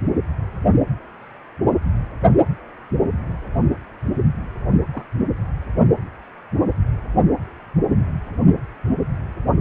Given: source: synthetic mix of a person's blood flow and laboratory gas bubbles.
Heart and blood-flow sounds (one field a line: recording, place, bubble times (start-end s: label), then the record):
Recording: Doppler ultrasound of blood flow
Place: precordium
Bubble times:
4.92-5.04 s: bubbles
From the record:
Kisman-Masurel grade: 121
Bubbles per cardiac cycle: 1 to 2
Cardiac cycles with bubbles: 10 to 50%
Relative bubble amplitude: barely perceptible (0.100 to 0.250)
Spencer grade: 2 (many but less than half of the cardiac periods contain bubble signals, singularly or in groups)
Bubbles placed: only in the low amplitude regions of the cardiac cycle